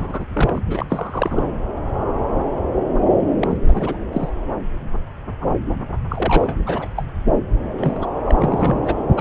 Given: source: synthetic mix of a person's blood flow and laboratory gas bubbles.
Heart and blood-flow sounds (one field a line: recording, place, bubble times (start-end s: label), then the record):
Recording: Doppler ultrasound of blood flow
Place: subclavian vein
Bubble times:
0.00-0.25 s: bubbles
0.33-0.60 s: bubbles
0.70-0.86 s: bubbles
0.89-1.56 s: bubbles
3.41-3.58 s: bubbles
3.67-3.97 s: bubbles
4.12-4.29 s: bubbles
6.09-6.57 s: bubbles
6.66-6.88 s: bubbles
6.96-7.05 s: bubbles
7.77-8.06 s: bubbles
8.25-8.35 s: bubbles
8.38-8.94 s: bubbles
9.16-9.21 s: bubbles
From the record:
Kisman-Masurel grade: 232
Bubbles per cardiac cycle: several, 3 to 8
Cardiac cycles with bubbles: 50 to 99%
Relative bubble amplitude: moderate (0.250 to 0.450)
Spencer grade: 3 (all of the cardiac periods contain showers or single bubble signals, but not dominating or overriding the cardiac motion signals)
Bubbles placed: anywhere in the cardiac cycle